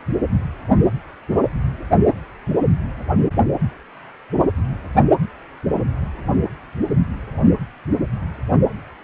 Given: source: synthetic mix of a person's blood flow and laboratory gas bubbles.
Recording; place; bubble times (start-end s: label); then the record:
Doppler ultrasound of blood flow; precordium
no bubbles
From the record:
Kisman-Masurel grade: 000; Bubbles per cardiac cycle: 0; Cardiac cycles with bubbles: 0%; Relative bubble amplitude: no bubbles discernible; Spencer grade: 0 (complete lack of bubble signals)